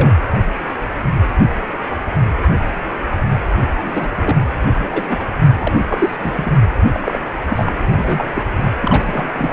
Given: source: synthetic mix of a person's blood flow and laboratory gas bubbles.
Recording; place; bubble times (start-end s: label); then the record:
Doppler ultrasound of blood flow; precordium
0.00-0.12 s: bubbles
3.82-4.09 s: bubbles
4.17-4.36 s: bubbles
4.75-5.25 s: bubbles
5.58-5.85 s: bubbles
5.88-6.15 s: bubbles
6.19-6.58 s: bubbles
6.92-7.19 s: bubbles
7.48-7.72 s: bubbles
7.88-8.30 s: bubbles
8.34-8.42 s: bubbles
8.59-8.71 s: bubbles
8.81-9.53 s: bubbles
From the record:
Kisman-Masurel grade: 232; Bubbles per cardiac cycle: several, 3 to 8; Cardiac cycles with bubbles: 50 to 99%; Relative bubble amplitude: moderate (0.250 to 0.450); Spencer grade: 3 (all of the cardiac periods contain showers or single bubble signals, but not dominating or overriding the cardiac motion signals); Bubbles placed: anywhere in the cardiac cycle